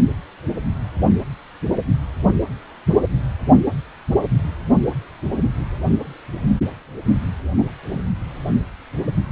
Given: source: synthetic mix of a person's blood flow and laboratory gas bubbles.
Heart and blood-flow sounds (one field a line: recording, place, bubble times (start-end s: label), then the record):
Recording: Doppler ultrasound of blood flow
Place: precordium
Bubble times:
7.58-7.63 s: bubbles
7.87-8.02 s: bubbles
From the record:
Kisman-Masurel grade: 111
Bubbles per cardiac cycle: 1 to 2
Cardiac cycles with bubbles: 1 to 10%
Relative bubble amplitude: barely perceptible (0.100 to 0.250)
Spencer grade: 1 (occasional bubble signal discernible with the cardiac motion signal, with majority of cardiac periods free of bubbles)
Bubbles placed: only in the low amplitude regions of the cardiac cycle